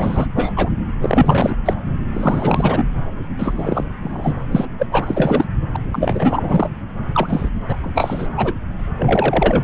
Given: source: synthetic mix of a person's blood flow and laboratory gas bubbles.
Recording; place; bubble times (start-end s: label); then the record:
Doppler ultrasound of blood flow; subclavian vein
0.00-0.27 s: bubbles
0.36-0.52 s: bubbles
0.56-0.69 s: bubbles
1.00-1.55 s: bubbles
1.65-1.74 s: bubbles
2.13-2.89 s: bubbles
3.38-3.84 s: bubbles
4.03-4.40 s: bubbles
4.51-4.66 s: bubbles
4.79-4.87 s: bubbles
4.92-5.45 s: bubbles
5.74-5.77 s: bubbles
5.92-6.70 s: bubbles
7.12-7.50 s: bubbles
7.69-7.77 s: bubbles
7.83-7.91 s: bubbles
7.94-8.29 s: bubbles
8.37-8.53 s: bubbles
8.79-8.82 s: bubbles
8.97-9.64 s: bubbles
From the record:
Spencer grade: 3 (all of the cardiac periods contain showers or single bubble signals, but not dominating or overriding the cardiac motion signals); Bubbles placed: anywhere in the cardiac cycle